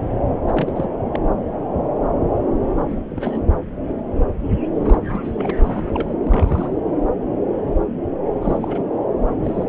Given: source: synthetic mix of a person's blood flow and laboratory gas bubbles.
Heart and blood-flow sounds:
Doppler ultrasound of blood flow; subclavian vein
0.46-0.72 s: bubbles
0.76-0.88 s: bubbles
1.04-1.09 s: bubbles
1.12-1.19 s: bubbles
2.77-2.83 s: bubbles
2.88-3.00 s: bubbles
3.09-3.40 s: bubbles
4.79-5.00 s: bubbles
5.08-5.20 s: bubbles
5.24-5.32 s: bubbles
5.38-5.58 s: bubbles
5.63-6.14 s: bubbles
6.25-6.79 s: bubbles
8.42-8.87 s: bubbles
9.20-9.31 s: bubbles
9.40-9.69 s: bubbles
From the record:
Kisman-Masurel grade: 221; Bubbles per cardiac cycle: several, 3 to 8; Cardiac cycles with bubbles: 10 to 50%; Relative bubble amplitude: barely perceptible (0.100 to 0.250); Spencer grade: 2 (many but less than half of the cardiac periods contain bubble signals, singularly or in groups); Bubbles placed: anywhere in the cardiac cycle

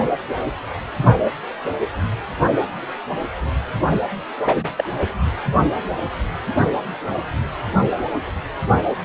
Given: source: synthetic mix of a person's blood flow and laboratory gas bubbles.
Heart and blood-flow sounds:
Doppler ultrasound of blood flow; precordium
4.45-4.68 s: bubbles
4.77-4.89 s: bubbles
From the record:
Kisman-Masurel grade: 112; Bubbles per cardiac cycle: 1 to 2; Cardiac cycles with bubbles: 1 to 10%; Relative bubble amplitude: moderate (0.250 to 0.450); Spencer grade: 1 (occasional bubble signal discernible with the cardiac motion signal, with majority of cardiac periods free of bubbles); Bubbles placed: only in the low amplitude regions of the cardiac cycle

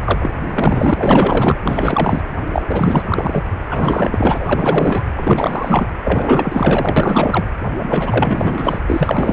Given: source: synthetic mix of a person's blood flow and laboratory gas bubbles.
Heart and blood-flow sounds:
Doppler ultrasound of blood flow; precordium
0.06-0.33 s: bubbles
0.43-1.57 s: bubbles
1.65-2.21 s: bubbles
2.52-2.62 s: bubbles
2.67-3.03 s: bubbles
3.08-3.44 s: bubbles
3.70-5.02 s: bubbles
5.15-5.88 s: bubbles
6.04-7.45 s: bubbles
7.78-8.80 s: bubbles
8.88-9.33 s: bubbles
From the record:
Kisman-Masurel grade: 444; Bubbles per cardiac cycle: continuous sound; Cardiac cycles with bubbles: 100%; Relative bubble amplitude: maximal (0.775 to 0.999); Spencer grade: 4 (maximum detectable bubble signal sounding continuously throughout systole and diastole of every cardiac period, and overriding the amplitude of the normal cardiac signals); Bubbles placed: anywhere in the cardiac cycle

